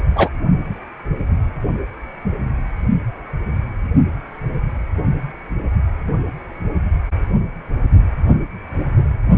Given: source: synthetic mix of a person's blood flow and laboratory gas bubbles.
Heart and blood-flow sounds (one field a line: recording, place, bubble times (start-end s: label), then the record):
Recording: Doppler ultrasound of blood flow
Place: precordium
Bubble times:
0.15-0.29 s: bubbles
From the record:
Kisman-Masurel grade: 213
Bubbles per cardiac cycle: several, 3 to 8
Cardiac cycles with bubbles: 1 to 10%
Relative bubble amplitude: loud (0.450 to 0.775)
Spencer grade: 1 (occasional bubble signal discernible with the cardiac motion signal, with majority of cardiac periods free of bubbles)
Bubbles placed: only in the low amplitude regions of the cardiac cycle